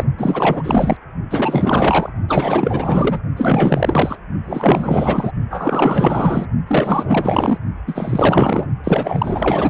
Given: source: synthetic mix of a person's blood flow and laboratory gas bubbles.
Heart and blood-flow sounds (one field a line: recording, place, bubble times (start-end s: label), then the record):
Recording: Doppler ultrasound of blood flow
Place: precordium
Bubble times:
0.00-0.04 s: bubbles
0.18-0.97 s: bubbles
1.31-2.10 s: bubbles
2.28-3.19 s: bubbles
3.37-4.17 s: bubbles
4.42-5.31 s: bubbles
5.50-6.46 s: bubbles
6.67-7.58 s: bubbles
7.87-8.66 s: bubbles
8.83-9.69 s: bubbles
From the record:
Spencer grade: 4 (maximum detectable bubble signal sounding continuously throughout systole and diastole of every cardiac period, and overriding the amplitude of the normal cardiac signals)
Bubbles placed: only in the low amplitude regions of the cardiac cycle